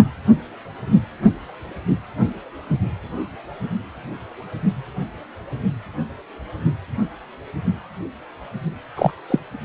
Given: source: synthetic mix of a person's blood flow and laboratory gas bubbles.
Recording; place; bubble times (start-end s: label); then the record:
Doppler ultrasound of blood flow; precordium
8.96-9.10 s: bubbles
9.30-9.40 s: bubbles
From the record:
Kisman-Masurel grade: 213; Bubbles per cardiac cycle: several, 3 to 8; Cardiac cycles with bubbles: 1 to 10%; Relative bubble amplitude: loud (0.450 to 0.775); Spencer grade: 1 (occasional bubble signal discernible with the cardiac motion signal, with majority of cardiac periods free of bubbles); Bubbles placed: only in the low amplitude regions of the cardiac cycle